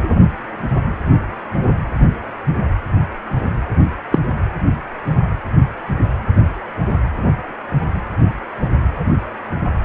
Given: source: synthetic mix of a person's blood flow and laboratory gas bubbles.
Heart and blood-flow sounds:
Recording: Doppler ultrasound of blood flow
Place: precordium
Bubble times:
4.11-4.19 s: bubbles
From the record:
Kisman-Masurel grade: 113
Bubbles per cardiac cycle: 1 to 2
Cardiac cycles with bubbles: 1 to 10%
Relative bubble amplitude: loud (0.450 to 0.775)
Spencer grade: 1 (occasional bubble signal discernible with the cardiac motion signal, with majority of cardiac periods free of bubbles)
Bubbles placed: anywhere in the cardiac cycle

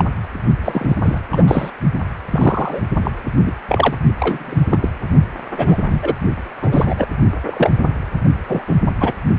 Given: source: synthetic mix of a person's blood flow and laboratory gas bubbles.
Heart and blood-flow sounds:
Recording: Doppler ultrasound of blood flow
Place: precordium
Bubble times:
0.00-0.04 s: bubbles
0.65-0.96 s: bubbles
1.02-1.18 s: bubbles
1.31-1.70 s: bubbles
2.31-2.81 s: bubbles
3.04-3.11 s: bubbles
3.46-3.52 s: bubbles
3.68-3.96 s: bubbles
4.20-4.63 s: bubbles
4.70-4.90 s: bubbles
5.58-6.15 s: bubbles
6.62-7.07 s: bubbles
7.43-7.71 s: bubbles
8.48-8.62 s: bubbles
8.67-8.75 s: bubbles
9.00-9.12 s: bubbles
From the record:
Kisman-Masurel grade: 233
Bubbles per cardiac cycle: several, 3 to 8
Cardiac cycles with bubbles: 50 to 99%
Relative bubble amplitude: loud (0.450 to 0.775)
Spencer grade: 3 (all of the cardiac periods contain showers or single bubble signals, but not dominating or overriding the cardiac motion signals)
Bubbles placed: only in the low amplitude regions of the cardiac cycle

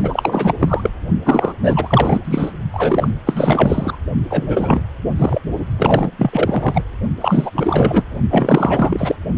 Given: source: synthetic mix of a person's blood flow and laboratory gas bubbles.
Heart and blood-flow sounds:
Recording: Doppler ultrasound of blood flow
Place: precordium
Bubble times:
0.00-0.54 s: bubbles
0.59-0.90 s: bubbles
1.25-1.54 s: bubbles
1.63-2.21 s: bubbles
2.24-2.52 s: bubbles
2.73-3.10 s: bubbles
3.26-3.99 s: bubbles
4.29-4.81 s: bubbles
5.17-5.42 s: bubbles
5.78-6.11 s: bubbles
6.19-6.83 s: bubbles
7.21-7.51 s: bubbles
7.55-8.04 s: bubbles
8.30-9.15 s: bubbles
From the record:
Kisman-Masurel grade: 444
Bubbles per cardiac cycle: continuous sound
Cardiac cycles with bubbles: 100%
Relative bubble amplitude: maximal (0.775 to 0.999)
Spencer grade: 4 (maximum detectable bubble signal sounding continuously throughout systole and diastole of every cardiac period, and overriding the amplitude of the normal cardiac signals)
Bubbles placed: only in the low amplitude regions of the cardiac cycle

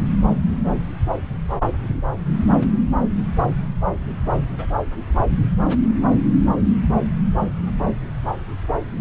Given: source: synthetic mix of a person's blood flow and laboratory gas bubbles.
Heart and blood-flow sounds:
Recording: Doppler ultrasound of blood flow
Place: subclavian vein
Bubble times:
4.58-4.66 s: bubbles
From the record:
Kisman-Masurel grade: 111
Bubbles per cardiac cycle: 1 to 2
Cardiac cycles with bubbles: 1 to 10%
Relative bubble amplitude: barely perceptible (0.100 to 0.250)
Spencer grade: 1 (occasional bubble signal discernible with the cardiac motion signal, with majority of cardiac periods free of bubbles)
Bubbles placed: anywhere in the cardiac cycle

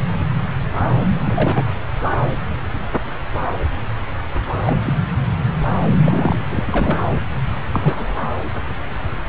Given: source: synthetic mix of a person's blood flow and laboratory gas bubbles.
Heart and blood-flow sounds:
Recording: Doppler ultrasound of blood flow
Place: subclavian vein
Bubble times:
1.24-1.66 s: bubbles
4.67-4.75 s: bubbles
4.85-4.94 s: bubbles
6.03-6.46 s: bubbles
6.50-6.99 s: bubbles
7.71-8.15 s: bubbles
From the record:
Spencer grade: 2 (many but less than half of the cardiac periods contain bubble signals, singularly or in groups)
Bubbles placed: anywhere in the cardiac cycle

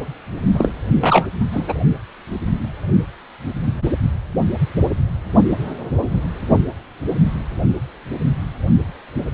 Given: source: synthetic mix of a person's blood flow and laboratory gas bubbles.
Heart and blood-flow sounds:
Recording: Doppler ultrasound of blood flow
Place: precordium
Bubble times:
0.54-0.71 s: bubbles
1.01-1.27 s: bubbles
1.52-1.74 s: bubbles
From the record:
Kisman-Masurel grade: 213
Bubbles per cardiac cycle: several, 3 to 8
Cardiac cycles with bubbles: 1 to 10%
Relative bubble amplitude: loud (0.450 to 0.775)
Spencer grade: 1 (occasional bubble signal discernible with the cardiac motion signal, with majority of cardiac periods free of bubbles)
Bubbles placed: only in the low amplitude regions of the cardiac cycle

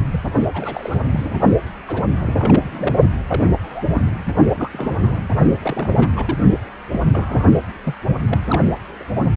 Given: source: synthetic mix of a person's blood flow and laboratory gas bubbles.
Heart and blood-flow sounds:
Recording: Doppler ultrasound of blood flow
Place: precordium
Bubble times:
0.11-0.21 s: bubbles
0.53-1.40 s: bubbles
1.87-2.02 s: bubbles
2.08-2.96 s: bubbles
3.27-3.52 s: bubbles
3.62-4.02 s: bubbles
4.05-4.09 s: bubbles
4.54-5.18 s: bubbles
5.62-6.12 s: bubbles
6.16-6.36 s: bubbles
6.91-7.01 s: bubbles
7.09-7.52 s: bubbles
7.83-7.95 s: bubbles
8.27-8.42 s: bubbles
8.46-8.74 s: bubbles
8.99-9.03 s: bubbles
From the record:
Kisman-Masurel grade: 232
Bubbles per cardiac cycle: several, 3 to 8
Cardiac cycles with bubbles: 50 to 99%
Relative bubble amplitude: moderate (0.250 to 0.450)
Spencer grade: 3 (all of the cardiac periods contain showers or single bubble signals, but not dominating or overriding the cardiac motion signals)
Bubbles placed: only in the low amplitude regions of the cardiac cycle

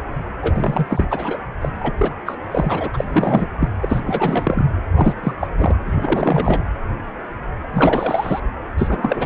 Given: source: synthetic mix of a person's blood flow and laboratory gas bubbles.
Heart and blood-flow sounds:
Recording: Doppler ultrasound of blood flow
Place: precordium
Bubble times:
0.42-1.04 s: bubbles
1.09-1.38 s: bubbles
1.61-1.69 s: bubbles
1.80-1.94 s: bubbles
1.98-2.11 s: bubbles
2.25-2.38 s: bubbles
2.51-2.90 s: bubbles
2.94-3.46 s: bubbles
3.59-3.69 s: bubbles
3.80-4.66 s: bubbles
4.95-5.14 s: bubbles
5.23-5.33 s: bubbles
5.41-5.47 s: bubbles
5.57-5.76 s: bubbles
5.86-6.60 s: bubbles
7.73-8.40 s: bubbles
8.78-9.26 s: bubbles
From the record:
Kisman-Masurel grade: 333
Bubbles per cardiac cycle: rolling drumbeat, 9 or more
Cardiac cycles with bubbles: 50 to 99%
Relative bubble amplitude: loud (0.450 to 0.775)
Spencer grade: 3 (all of the cardiac periods contain showers or single bubble signals, but not dominating or overriding the cardiac motion signals)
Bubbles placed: anywhere in the cardiac cycle

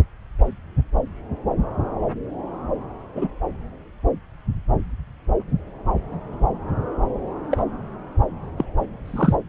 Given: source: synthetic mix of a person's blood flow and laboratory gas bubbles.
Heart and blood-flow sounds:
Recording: Doppler ultrasound of blood flow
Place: subclavian vein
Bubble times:
3.16-3.27 s: bubbles
7.51-7.65 s: bubbles
8.58-8.65 s: bubbles
9.05-9.36 s: bubbles
From the record:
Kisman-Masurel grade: 122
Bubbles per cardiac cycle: 1 to 2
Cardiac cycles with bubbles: 10 to 50%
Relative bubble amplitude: moderate (0.250 to 0.450)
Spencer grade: 2 (many but less than half of the cardiac periods contain bubble signals, singularly or in groups)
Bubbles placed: anywhere in the cardiac cycle

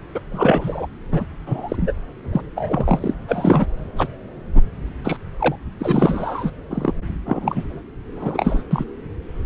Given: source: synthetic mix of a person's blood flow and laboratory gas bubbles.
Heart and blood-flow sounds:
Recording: Doppler ultrasound of blood flow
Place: subclavian vein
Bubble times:
0.14-0.20 s: bubbles
0.31-0.86 s: bubbles
1.11-1.23 s: bubbles
1.46-1.76 s: bubbles
1.80-1.93 s: bubbles
2.32-2.42 s: bubbles
2.56-3.14 s: bubbles
3.28-3.65 s: bubbles
3.97-4.07 s: bubbles
4.54-4.61 s: bubbles
5.04-5.17 s: bubbles
5.38-5.55 s: bubbles
5.79-6.50 s: bubbles
6.71-6.92 s: bubbles
7.25-7.64 s: bubbles
8.14-8.63 s: bubbles
8.71-8.84 s: bubbles
From the record:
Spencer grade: 3 (all of the cardiac periods contain showers or single bubble signals, but not dominating or overriding the cardiac motion signals)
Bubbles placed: anywhere in the cardiac cycle

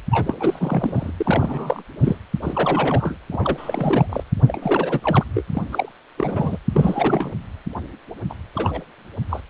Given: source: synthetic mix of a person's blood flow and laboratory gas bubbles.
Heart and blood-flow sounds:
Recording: Doppler ultrasound of blood flow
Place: precordium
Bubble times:
0.11-0.35 s: bubbles
0.39-1.11 s: bubbles
1.17-1.83 s: bubbles
2.00-2.17 s: bubbles
2.42-3.16 s: bubbles
3.31-4.24 s: bubbles
4.48-5.00 s: bubbles
5.04-5.24 s: bubbles
5.34-5.42 s: bubbles
5.54-5.62 s: bubbles
5.71-5.89 s: bubbles
6.17-6.58 s: bubbles
6.72-7.33 s: bubbles
8.29-8.34 s: bubbles
8.54-8.81 s: bubbles
9.29-9.40 s: bubbles
From the record:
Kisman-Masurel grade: 342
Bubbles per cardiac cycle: rolling drumbeat, 9 or more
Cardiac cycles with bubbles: 100%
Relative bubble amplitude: moderate (0.250 to 0.450)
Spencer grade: 3 (all of the cardiac periods contain showers or single bubble signals, but not dominating or overriding the cardiac motion signals)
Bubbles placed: anywhere in the cardiac cycle

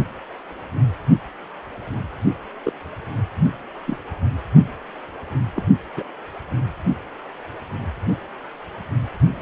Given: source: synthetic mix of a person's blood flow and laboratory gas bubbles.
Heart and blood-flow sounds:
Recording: Doppler ultrasound of blood flow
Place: precordium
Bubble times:
2.65-2.73 s: bubbles
3.86-3.98 s: bubbles
4.53-4.62 s: bubbles
5.54-5.63 s: bubbles
5.96-6.04 s: bubbles
From the record:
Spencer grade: 2 (many but less than half of the cardiac periods contain bubble signals, singularly or in groups)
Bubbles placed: anywhere in the cardiac cycle

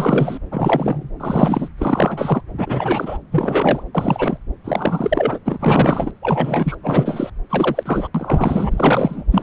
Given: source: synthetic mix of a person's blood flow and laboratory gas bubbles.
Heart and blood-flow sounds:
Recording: Doppler ultrasound of blood flow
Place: subclavian vein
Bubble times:
0.00-0.39 s: bubbles
0.51-1.10 s: bubbles
1.19-1.68 s: bubbles
1.78-2.42 s: bubbles
2.58-3.18 s: bubbles
3.31-3.83 s: bubbles
3.94-4.38 s: bubbles
4.64-5.38 s: bubbles
5.45-6.11 s: bubbles
6.22-6.76 s: bubbles
6.82-7.30 s: bubbles
7.49-8.07 s: bubbles
8.14-9.24 s: bubbles
9.31-9.43 s: bubbles
From the record:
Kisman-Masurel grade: 343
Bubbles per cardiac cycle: rolling drumbeat, 9 or more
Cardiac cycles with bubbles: 100%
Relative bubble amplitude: loud (0.450 to 0.775)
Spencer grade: 3 (all of the cardiac periods contain showers or single bubble signals, but not dominating or overriding the cardiac motion signals)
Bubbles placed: anywhere in the cardiac cycle

